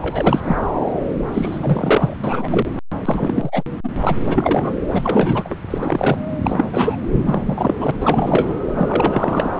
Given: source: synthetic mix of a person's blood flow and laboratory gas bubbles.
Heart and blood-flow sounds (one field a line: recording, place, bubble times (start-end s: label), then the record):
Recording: Doppler ultrasound of blood flow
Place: subclavian vein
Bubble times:
0.02-0.40 s: bubbles
0.43-0.57 s: bubbles
1.32-2.16 s: bubbles
2.24-2.70 s: bubbles
3.06-3.63 s: bubbles
3.84-3.89 s: bubbles
4.02-4.16 s: bubbles
4.26-4.78 s: bubbles
4.91-5.56 s: bubbles
5.70-6.17 s: bubbles
6.42-6.67 s: bubbles
6.72-6.96 s: bubbles
7.25-7.42 s: bubbles
7.46-7.75 s: bubbles
7.79-7.91 s: bubbles
8.01-8.53 s: bubbles
8.79-9.53 s: bubbles
From the record:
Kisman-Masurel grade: 342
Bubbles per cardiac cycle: rolling drumbeat, 9 or more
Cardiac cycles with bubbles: 100%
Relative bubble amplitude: moderate (0.250 to 0.450)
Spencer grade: 3 (all of the cardiac periods contain showers or single bubble signals, but not dominating or overriding the cardiac motion signals)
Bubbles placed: anywhere in the cardiac cycle